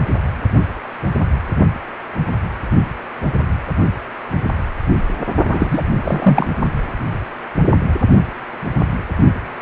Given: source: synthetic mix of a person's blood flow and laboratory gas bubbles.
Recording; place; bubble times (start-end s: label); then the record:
Doppler ultrasound of blood flow; precordium
5.45-5.82 s: bubbles
6.04-6.47 s: bubbles
From the record:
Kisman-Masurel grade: 213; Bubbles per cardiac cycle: several, 3 to 8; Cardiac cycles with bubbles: 1 to 10%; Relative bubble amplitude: loud (0.450 to 0.775); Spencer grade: 1 (occasional bubble signal discernible with the cardiac motion signal, with majority of cardiac periods free of bubbles); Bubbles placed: only in the low amplitude regions of the cardiac cycle